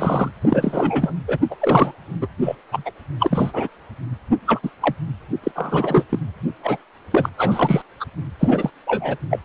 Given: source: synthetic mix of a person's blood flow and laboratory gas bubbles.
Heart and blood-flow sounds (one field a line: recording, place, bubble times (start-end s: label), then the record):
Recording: Doppler ultrasound of blood flow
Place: precordium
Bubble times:
0.00-0.31 s: bubbles
0.41-1.13 s: bubbles
1.27-1.38 s: bubbles
1.50-1.55 s: bubbles
1.60-1.92 s: bubbles
2.21-2.28 s: bubbles
2.41-2.55 s: bubbles
2.71-2.91 s: bubbles
3.20-3.68 s: bubbles
4.46-4.71 s: bubbles
4.81-4.95 s: bubbles
5.43-5.52 s: bubbles
5.56-6.06 s: bubbles
6.09-6.20 s: bubbles
6.63-6.77 s: bubbles
7.11-7.29 s: bubbles
7.38-7.82 s: bubbles
8.00-8.05 s: bubbles
8.39-8.70 s: bubbles
8.87-9.17 s: bubbles
9.30-9.39 s: bubbles
From the record:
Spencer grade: 3 (all of the cardiac periods contain showers or single bubble signals, but not dominating or overriding the cardiac motion signals)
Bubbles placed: anywhere in the cardiac cycle